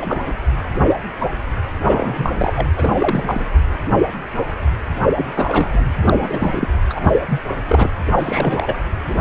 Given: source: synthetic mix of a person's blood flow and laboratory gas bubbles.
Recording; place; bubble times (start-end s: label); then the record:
Doppler ultrasound of blood flow; precordium
0.00-0.22 s: bubbles
0.26-0.32 s: bubbles
1.83-2.53 s: bubbles
2.55-2.67 s: bubbles
2.76-3.50 s: bubbles
5.15-5.85 s: bubbles
6.03-6.68 s: bubbles
6.90-7.25 s: bubbles
7.29-7.42 s: bubbles
7.68-7.91 s: bubbles
8.19-8.79 s: bubbles
9.08-9.18 s: bubbles
From the record:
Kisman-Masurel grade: 332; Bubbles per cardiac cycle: rolling drumbeat, 9 or more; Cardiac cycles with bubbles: 50 to 99%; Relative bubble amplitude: moderate (0.250 to 0.450); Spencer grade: 3 (all of the cardiac periods contain showers or single bubble signals, but not dominating or overriding the cardiac motion signals); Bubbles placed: anywhere in the cardiac cycle